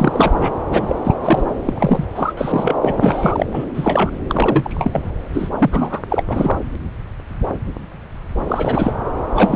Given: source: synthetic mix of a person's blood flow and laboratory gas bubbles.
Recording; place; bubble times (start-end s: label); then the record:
Doppler ultrasound of blood flow; subclavian vein
0.00-0.51 s: bubbles
0.71-0.96 s: bubbles
1.04-1.14 s: bubbles
1.23-1.44 s: bubbles
1.65-2.04 s: bubbles
2.15-2.33 s: bubbles
2.37-2.75 s: bubbles
2.83-3.46 s: bubbles
3.52-3.65 s: bubbles
3.73-4.11 s: bubbles
4.28-5.03 s: bubbles
5.33-5.50 s: bubbles
5.58-6.02 s: bubbles
6.09-6.23 s: bubbles
6.28-6.59 s: bubbles
8.47-8.94 s: bubbles
9.34-9.56 s: bubbles
From the record:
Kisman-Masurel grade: 333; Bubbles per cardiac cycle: rolling drumbeat, 9 or more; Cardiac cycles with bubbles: 50 to 99%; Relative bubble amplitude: loud (0.450 to 0.775); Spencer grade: 3 (all of the cardiac periods contain showers or single bubble signals, but not dominating or overriding the cardiac motion signals); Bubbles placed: anywhere in the cardiac cycle